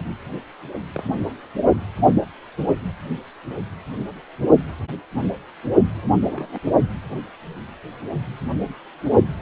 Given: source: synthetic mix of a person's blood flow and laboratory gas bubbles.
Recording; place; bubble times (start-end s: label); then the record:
Doppler ultrasound of blood flow; precordium
0.94-1.03 s: bubbles
6.27-6.58 s: bubbles
From the record:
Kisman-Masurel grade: 121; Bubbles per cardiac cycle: 1 to 2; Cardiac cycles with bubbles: 10 to 50%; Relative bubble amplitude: barely perceptible (0.100 to 0.250); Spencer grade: 2 (many but less than half of the cardiac periods contain bubble signals, singularly or in groups); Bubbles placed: only in the low amplitude regions of the cardiac cycle